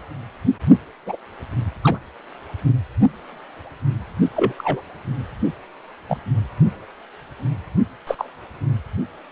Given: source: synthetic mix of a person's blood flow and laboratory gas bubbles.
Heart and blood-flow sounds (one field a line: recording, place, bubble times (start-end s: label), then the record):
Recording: Doppler ultrasound of blood flow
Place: precordium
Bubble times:
1.06-1.17 s: bubbles
1.83-1.98 s: bubbles
4.36-4.54 s: bubbles
4.58-4.82 s: bubbles
6.09-6.18 s: bubbles
8.07-8.15 s: bubbles
8.18-8.29 s: bubbles
From the record:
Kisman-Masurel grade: 122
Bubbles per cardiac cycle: 1 to 2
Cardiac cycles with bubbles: 10 to 50%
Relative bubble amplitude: moderate (0.250 to 0.450)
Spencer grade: 2 (many but less than half of the cardiac periods contain bubble signals, singularly or in groups)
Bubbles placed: only in the low amplitude regions of the cardiac cycle